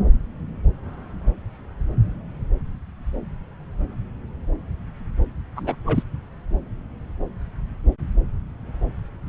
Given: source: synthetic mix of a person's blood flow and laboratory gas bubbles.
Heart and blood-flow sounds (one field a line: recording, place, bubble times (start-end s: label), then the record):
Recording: Doppler ultrasound of blood flow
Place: subclavian vein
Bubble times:
5.55-5.75 s: bubbles
5.86-6.02 s: bubbles
From the record:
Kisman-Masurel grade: 212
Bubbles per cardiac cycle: several, 3 to 8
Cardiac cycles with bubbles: 1 to 10%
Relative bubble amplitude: moderate (0.250 to 0.450)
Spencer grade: 1 (occasional bubble signal discernible with the cardiac motion signal, with majority of cardiac periods free of bubbles)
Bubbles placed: anywhere in the cardiac cycle